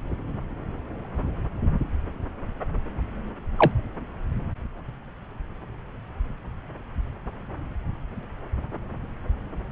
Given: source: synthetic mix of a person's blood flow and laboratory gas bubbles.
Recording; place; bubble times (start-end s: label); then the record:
Doppler ultrasound of blood flow; subclavian vein
3.58-3.71 s: bubbles
From the record:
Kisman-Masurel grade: 113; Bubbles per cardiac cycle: 1 to 2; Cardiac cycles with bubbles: 1 to 10%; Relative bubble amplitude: loud (0.450 to 0.775); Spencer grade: 1 (occasional bubble signal discernible with the cardiac motion signal, with majority of cardiac periods free of bubbles); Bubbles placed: anywhere in the cardiac cycle